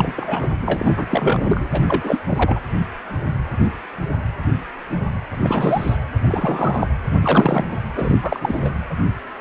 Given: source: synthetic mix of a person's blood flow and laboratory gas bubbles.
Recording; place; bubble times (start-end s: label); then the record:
Doppler ultrasound of blood flow; precordium
0.00-0.13 s: bubbles
0.15-0.51 s: bubbles
0.62-1.06 s: bubbles
1.11-1.67 s: bubbles
1.72-1.82 s: bubbles
1.87-2.20 s: bubbles
2.26-2.60 s: bubbles
5.31-5.96 s: bubbles
6.27-6.88 s: bubbles
7.21-7.65 s: bubbles
7.96-8.20 s: bubbles
8.22-8.75 s: bubbles
From the record:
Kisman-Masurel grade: 333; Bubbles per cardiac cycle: rolling drumbeat, 9 or more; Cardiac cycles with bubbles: 50 to 99%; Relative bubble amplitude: loud (0.450 to 0.775); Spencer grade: 3 (all of the cardiac periods contain showers or single bubble signals, but not dominating or overriding the cardiac motion signals); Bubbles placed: anywhere in the cardiac cycle